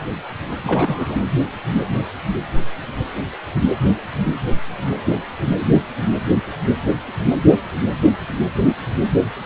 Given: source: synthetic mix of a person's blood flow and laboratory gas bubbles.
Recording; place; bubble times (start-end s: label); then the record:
Doppler ultrasound of blood flow; precordium
0.63-1.17 s: bubbles
From the record:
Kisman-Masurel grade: 212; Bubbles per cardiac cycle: several, 3 to 8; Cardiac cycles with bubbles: 1 to 10%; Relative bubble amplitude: moderate (0.250 to 0.450); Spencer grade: 1 (occasional bubble signal discernible with the cardiac motion signal, with majority of cardiac periods free of bubbles); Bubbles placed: anywhere in the cardiac cycle